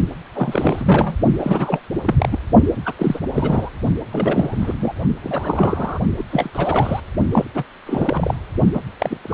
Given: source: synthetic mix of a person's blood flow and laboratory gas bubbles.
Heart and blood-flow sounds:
Doppler ultrasound of blood flow; precordium
0.34-1.17 s: bubbles
1.39-1.79 s: bubbles
2.05-2.38 s: bubbles
2.85-2.93 s: bubbles
2.99-3.19 s: bubbles
3.34-3.68 s: bubbles
4.12-4.75 s: bubbles
4.79-4.95 s: bubbles
5.22-6.00 s: bubbles
6.17-6.23 s: bubbles
6.30-6.50 s: bubbles
6.54-7.00 s: bubbles
7.31-7.45 s: bubbles
7.54-7.64 s: bubbles
7.86-8.35 s: bubbles
8.73-8.80 s: bubbles
8.99-9.18 s: bubbles
9.23-9.34 s: bubbles
From the record:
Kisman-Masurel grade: 332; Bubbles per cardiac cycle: rolling drumbeat, 9 or more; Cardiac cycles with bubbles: 50 to 99%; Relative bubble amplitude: moderate (0.250 to 0.450); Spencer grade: 3 (all of the cardiac periods contain showers or single bubble signals, but not dominating or overriding the cardiac motion signals); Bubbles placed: only in the low amplitude regions of the cardiac cycle

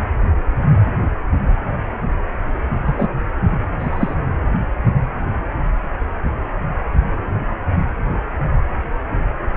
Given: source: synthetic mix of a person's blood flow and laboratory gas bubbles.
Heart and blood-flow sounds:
Doppler ultrasound of blood flow; precordium
2.85-3.08 s: bubbles
3.79-4.16 s: bubbles
From the record:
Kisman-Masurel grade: 123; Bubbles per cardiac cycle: 1 to 2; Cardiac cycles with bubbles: 10 to 50%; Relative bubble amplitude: loud (0.450 to 0.775); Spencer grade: 2 (many but less than half of the cardiac periods contain bubble signals, singularly or in groups); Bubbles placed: anywhere in the cardiac cycle

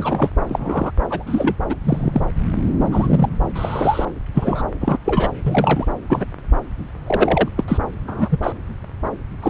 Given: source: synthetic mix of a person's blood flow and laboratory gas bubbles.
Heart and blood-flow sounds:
Doppler ultrasound of blood flow; subclavian vein
0.00-0.30 s: bubbles
0.49-0.91 s: bubbles
1.09-1.23 s: bubbles
1.26-1.55 s: bubbles
1.69-1.76 s: bubbles
1.83-2.22 s: bubbles
2.92-3.29 s: bubbles
3.40-3.50 s: bubbles
3.55-4.05 s: bubbles
4.34-4.62 s: bubbles
4.81-4.97 s: bubbles
5.05-5.29 s: bubbles
5.43-5.85 s: bubbles
6.09-6.25 s: bubbles
7.06-7.48 s: bubbles
7.57-7.64 s: bubbles
7.68-7.78 s: bubbles
8.07-8.39 s: bubbles
8.42-8.53 s: bubbles
9.42-9.50 s: bubbles
From the record:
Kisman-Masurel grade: 232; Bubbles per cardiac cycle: several, 3 to 8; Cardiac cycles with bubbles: 50 to 99%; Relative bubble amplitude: moderate (0.250 to 0.450); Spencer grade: 3 (all of the cardiac periods contain showers or single bubble signals, but not dominating or overriding the cardiac motion signals); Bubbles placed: anywhere in the cardiac cycle

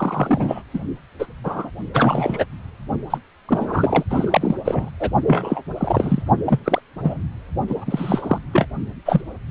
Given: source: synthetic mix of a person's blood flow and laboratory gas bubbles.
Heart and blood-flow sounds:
Doppler ultrasound of blood flow; precordium
0.00-0.62 s: bubbles
0.73-0.79 s: bubbles
1.19-1.26 s: bubbles
1.44-1.70 s: bubbles
1.94-2.46 s: bubbles
3.10-3.18 s: bubbles
3.48-4.04 s: bubbles
4.10-4.58 s: bubbles
4.64-4.91 s: bubbles
5.00-5.11 s: bubbles
5.26-5.62 s: bubbles
5.78-6.22 s: bubbles
6.46-6.60 s: bubbles
6.64-6.80 s: bubbles
7.04-7.22 s: bubbles
7.68-8.38 s: bubbles
8.53-8.68 s: bubbles
9.05-9.21 s: bubbles
From the record:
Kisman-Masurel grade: 243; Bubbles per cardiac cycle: several, 3 to 8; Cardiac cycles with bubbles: 100%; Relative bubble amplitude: loud (0.450 to 0.775); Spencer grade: 3 (all of the cardiac periods contain showers or single bubble signals, but not dominating or overriding the cardiac motion signals); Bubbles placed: only in the low amplitude regions of the cardiac cycle

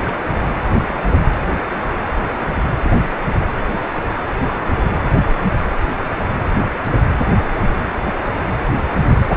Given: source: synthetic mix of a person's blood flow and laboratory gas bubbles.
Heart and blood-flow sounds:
Doppler ultrasound of blood flow; precordium
0.06-0.15 s: bubbles
From the record:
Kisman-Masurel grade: 111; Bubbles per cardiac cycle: 1 to 2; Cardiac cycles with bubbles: 1 to 10%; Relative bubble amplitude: barely perceptible (0.100 to 0.250); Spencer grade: 1 (occasional bubble signal discernible with the cardiac motion signal, with majority of cardiac periods free of bubbles); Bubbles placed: anywhere in the cardiac cycle

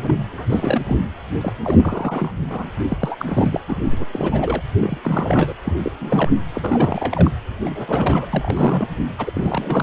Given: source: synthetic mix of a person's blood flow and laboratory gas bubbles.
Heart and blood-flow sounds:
Doppler ultrasound of blood flow; precordium
0.00-0.14 s: bubbles
0.32-0.97 s: bubbles
1.41-1.53 s: bubbles
1.62-2.31 s: bubbles
2.50-2.70 s: bubbles
2.88-3.60 s: bubbles
3.68-3.77 s: bubbles
3.91-4.05 s: bubbles
4.12-4.62 s: bubbles
4.81-4.98 s: bubbles
5.03-5.54 s: bubbles
5.65-5.77 s: bubbles
5.83-5.92 s: bubbles
6.00-6.31 s: bubbles
6.54-7.31 s: bubbles
7.65-7.70 s: bubbles
7.75-8.27 s: bubbles
8.33-8.88 s: bubbles
9.18-9.83 s: bubbles
From the record:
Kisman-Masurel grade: 342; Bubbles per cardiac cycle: rolling drumbeat, 9 or more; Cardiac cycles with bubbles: 100%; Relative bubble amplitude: moderate (0.250 to 0.450); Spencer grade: 3 (all of the cardiac periods contain showers or single bubble signals, but not dominating or overriding the cardiac motion signals); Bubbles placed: anywhere in the cardiac cycle

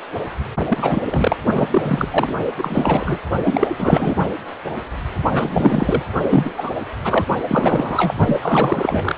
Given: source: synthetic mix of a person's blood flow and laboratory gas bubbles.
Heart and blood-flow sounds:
Doppler ultrasound of blood flow; precordium
0.68-1.02 s: bubbles
1.04-1.36 s: bubbles
1.54-2.08 s: bubbles
2.11-2.33 s: bubbles
2.58-3.18 s: bubbles
3.44-3.70 s: bubbles
3.78-4.15 s: bubbles
5.31-6.03 s: bubbles
6.30-6.71 s: bubbles
7.04-7.25 s: bubbles
7.47-8.14 s: bubbles
8.26-8.39 s: bubbles
8.41-9.15 s: bubbles
From the record:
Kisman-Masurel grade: 333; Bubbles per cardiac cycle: rolling drumbeat, 9 or more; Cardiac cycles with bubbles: 50 to 99%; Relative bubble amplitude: loud (0.450 to 0.775); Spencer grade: 3 (all of the cardiac periods contain showers or single bubble signals, but not dominating or overriding the cardiac motion signals); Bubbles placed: only in the low amplitude regions of the cardiac cycle

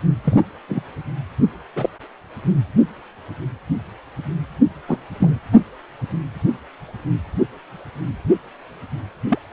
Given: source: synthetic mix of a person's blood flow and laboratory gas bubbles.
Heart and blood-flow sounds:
Doppler ultrasound of blood flow; precordium
0.24-0.42 s: bubbles
0.69-0.82 s: bubbles
1.75-1.90 s: bubbles
4.88-4.98 s: bubbles
5.20-5.39 s: bubbles
9.29-9.38 s: bubbles
From the record:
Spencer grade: 2 (many but less than half of the cardiac periods contain bubble signals, singularly or in groups); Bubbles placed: anywhere in the cardiac cycle

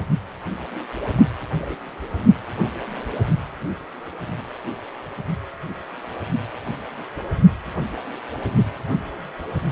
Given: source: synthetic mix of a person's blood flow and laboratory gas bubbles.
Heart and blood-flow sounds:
Doppler ultrasound of blood flow; precordium
1.59-1.75 s: bubbles
From the record:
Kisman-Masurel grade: 121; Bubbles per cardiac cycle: 1 to 2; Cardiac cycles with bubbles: 10 to 50%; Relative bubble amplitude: barely perceptible (0.100 to 0.250); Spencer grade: 2 (many but less than half of the cardiac periods contain bubble signals, singularly or in groups); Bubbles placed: only in the low amplitude regions of the cardiac cycle

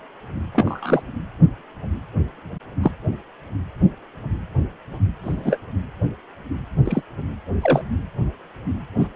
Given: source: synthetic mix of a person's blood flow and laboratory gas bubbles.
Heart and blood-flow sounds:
Doppler ultrasound of blood flow; precordium
0.53-1.02 s: bubbles
2.82-2.91 s: bubbles
5.23-5.58 s: bubbles
6.85-7.02 s: bubbles
7.62-7.81 s: bubbles
8.99-9.08 s: bubbles
From the record:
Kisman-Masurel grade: 123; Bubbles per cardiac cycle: 1 to 2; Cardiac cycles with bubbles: 10 to 50%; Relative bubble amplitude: loud (0.450 to 0.775); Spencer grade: 2 (many but less than half of the cardiac periods contain bubble signals, singularly or in groups); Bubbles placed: anywhere in the cardiac cycle

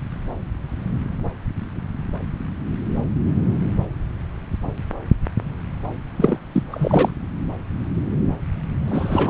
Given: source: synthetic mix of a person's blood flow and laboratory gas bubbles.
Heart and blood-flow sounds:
Doppler ultrasound of blood flow; subclavian vein
6.17-6.39 s: bubbles
6.53-6.63 s: bubbles
6.70-7.12 s: bubbles
8.87-9.30 s: bubbles
From the record:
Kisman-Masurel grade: 223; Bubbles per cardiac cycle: several, 3 to 8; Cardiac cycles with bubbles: 10 to 50%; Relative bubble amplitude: loud (0.450 to 0.775); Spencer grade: 2 (many but less than half of the cardiac periods contain bubble signals, singularly or in groups); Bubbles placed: anywhere in the cardiac cycle

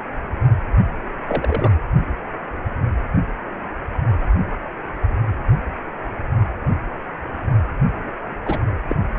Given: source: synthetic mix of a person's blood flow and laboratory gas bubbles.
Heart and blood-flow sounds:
Doppler ultrasound of blood flow; precordium
1.28-1.71 s: bubbles
8.46-8.59 s: bubbles
8.88-8.96 s: bubbles
From the record:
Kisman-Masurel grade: 122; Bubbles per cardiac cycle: 1 to 2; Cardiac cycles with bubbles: 10 to 50%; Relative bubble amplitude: moderate (0.250 to 0.450); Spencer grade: 2 (many but less than half of the cardiac periods contain bubble signals, singularly or in groups); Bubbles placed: anywhere in the cardiac cycle

